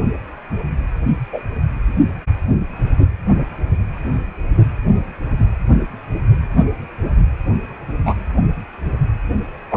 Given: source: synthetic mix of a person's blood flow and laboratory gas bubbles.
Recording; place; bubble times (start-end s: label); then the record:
Doppler ultrasound of blood flow; precordium
1.32-1.43 s: bubbles
8.06-8.16 s: bubbles
9.71-9.77 s: bubbles
From the record:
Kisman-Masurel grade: 123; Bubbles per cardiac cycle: 1 to 2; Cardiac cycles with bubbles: 10 to 50%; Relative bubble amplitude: loud (0.450 to 0.775); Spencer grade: 2 (many but less than half of the cardiac periods contain bubble signals, singularly or in groups); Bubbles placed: only in the low amplitude regions of the cardiac cycle